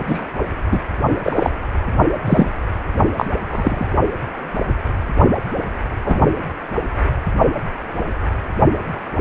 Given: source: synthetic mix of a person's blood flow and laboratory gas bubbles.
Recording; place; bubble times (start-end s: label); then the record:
Doppler ultrasound of blood flow; precordium
0.08-0.25 s: bubbles
0.71-0.80 s: bubbles
1.22-1.50 s: bubbles
2.25-2.52 s: bubbles
3.17-3.26 s: bubbles
3.47-3.88 s: bubbles
6.04-6.20 s: bubbles
From the record:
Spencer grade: 2 (many but less than half of the cardiac periods contain bubble signals, singularly or in groups); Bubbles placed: only in the low amplitude regions of the cardiac cycle